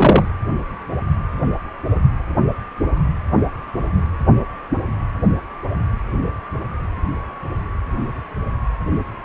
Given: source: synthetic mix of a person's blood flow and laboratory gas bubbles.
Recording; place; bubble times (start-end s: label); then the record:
Doppler ultrasound of blood flow; precordium
0.00-0.28 s: bubbles
From the record:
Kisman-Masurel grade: 213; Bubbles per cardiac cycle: several, 3 to 8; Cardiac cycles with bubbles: 1 to 10%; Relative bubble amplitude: loud (0.450 to 0.775); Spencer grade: 1 (occasional bubble signal discernible with the cardiac motion signal, with majority of cardiac periods free of bubbles); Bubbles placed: anywhere in the cardiac cycle